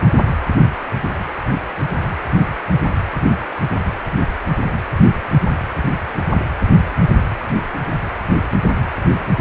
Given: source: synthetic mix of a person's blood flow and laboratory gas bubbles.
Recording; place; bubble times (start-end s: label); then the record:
Doppler ultrasound of blood flow; precordium
no bubbles
From the record:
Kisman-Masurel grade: 000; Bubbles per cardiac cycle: 0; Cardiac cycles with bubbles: 0%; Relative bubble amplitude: no bubbles discernible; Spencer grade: 0 (complete lack of bubble signals)